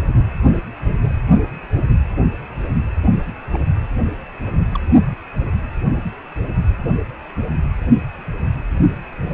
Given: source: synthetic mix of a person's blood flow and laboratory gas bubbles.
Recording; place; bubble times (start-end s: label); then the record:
Doppler ultrasound of blood flow; precordium
3.53-3.59 s: bubbles
4.41-4.65 s: bubbles
4.74-4.80 s: bubbles
From the record:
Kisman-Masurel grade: 121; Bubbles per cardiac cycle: 1 to 2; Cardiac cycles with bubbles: 10 to 50%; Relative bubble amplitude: barely perceptible (0.100 to 0.250); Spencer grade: 2 (many but less than half of the cardiac periods contain bubble signals, singularly or in groups); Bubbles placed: only in the low amplitude regions of the cardiac cycle